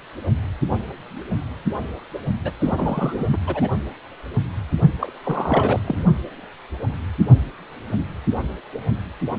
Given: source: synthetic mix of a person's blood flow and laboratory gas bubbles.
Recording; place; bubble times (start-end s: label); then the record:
Doppler ultrasound of blood flow; precordium
2.44-2.51 s: bubbles
2.58-3.27 s: bubbles
3.33-3.38 s: bubbles
3.46-3.69 s: bubbles
4.99-5.12 s: bubbles
5.23-5.80 s: bubbles
5.84-6.04 s: bubbles
From the record:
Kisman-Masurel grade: 232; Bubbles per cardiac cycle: several, 3 to 8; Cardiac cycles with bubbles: 50 to 99%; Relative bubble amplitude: moderate (0.250 to 0.450); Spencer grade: 3 (all of the cardiac periods contain showers or single bubble signals, but not dominating or overriding the cardiac motion signals); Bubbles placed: only in the low amplitude regions of the cardiac cycle